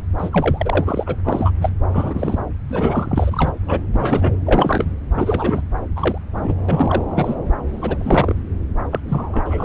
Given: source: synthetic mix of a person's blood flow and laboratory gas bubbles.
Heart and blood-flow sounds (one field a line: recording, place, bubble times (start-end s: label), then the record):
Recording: Doppler ultrasound of blood flow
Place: subclavian vein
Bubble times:
0.18-1.16 s: bubbles
1.25-1.51 s: bubbles
1.61-1.71 s: bubbles
1.93-2.38 s: bubbles
2.69-3.52 s: bubbles
3.66-3.79 s: bubbles
3.93-4.36 s: bubbles
4.45-4.85 s: bubbles
5.15-5.61 s: bubbles
5.96-6.18 s: bubbles
6.36-6.55 s: bubbles
6.69-7.04 s: bubbles
7.08-7.35 s: bubbles
7.73-8.35 s: bubbles
8.91-9.00 s: bubbles
9.08-9.65 s: bubbles
From the record:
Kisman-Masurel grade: 243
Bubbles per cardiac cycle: several, 3 to 8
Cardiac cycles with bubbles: 100%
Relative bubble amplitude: loud (0.450 to 0.775)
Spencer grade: 3 (all of the cardiac periods contain showers or single bubble signals, but not dominating or overriding the cardiac motion signals)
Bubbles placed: anywhere in the cardiac cycle